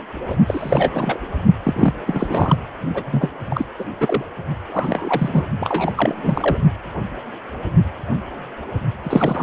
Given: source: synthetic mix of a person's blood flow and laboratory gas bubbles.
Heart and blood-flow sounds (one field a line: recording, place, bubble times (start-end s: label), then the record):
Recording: Doppler ultrasound of blood flow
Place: precordium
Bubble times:
0.26-0.36 s: bubbles
0.46-1.19 s: bubbles
1.63-1.93 s: bubbles
2.06-2.56 s: bubbles
2.94-3.29 s: bubbles
3.50-3.65 s: bubbles
3.79-3.84 s: bubbles
4.00-4.25 s: bubbles
4.69-5.49 s: bubbles
5.60-5.93 s: bubbles
5.96-6.58 s: bubbles
9.03-9.43 s: bubbles
From the record:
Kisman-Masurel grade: 332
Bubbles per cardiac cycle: rolling drumbeat, 9 or more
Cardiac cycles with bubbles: 50 to 99%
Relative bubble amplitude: moderate (0.250 to 0.450)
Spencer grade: 3 (all of the cardiac periods contain showers or single bubble signals, but not dominating or overriding the cardiac motion signals)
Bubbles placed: only in the low amplitude regions of the cardiac cycle